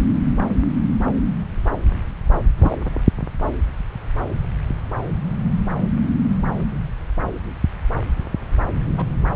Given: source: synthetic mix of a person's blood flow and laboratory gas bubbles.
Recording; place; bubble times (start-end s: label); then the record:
Doppler ultrasound of blood flow; subclavian vein
2.58-2.77 s: bubbles
8.97-9.07 s: bubbles
From the record:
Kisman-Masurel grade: 122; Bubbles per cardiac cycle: 1 to 2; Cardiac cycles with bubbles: 10 to 50%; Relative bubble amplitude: moderate (0.250 to 0.450); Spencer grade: 2 (many but less than half of the cardiac periods contain bubble signals, singularly or in groups); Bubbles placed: anywhere in the cardiac cycle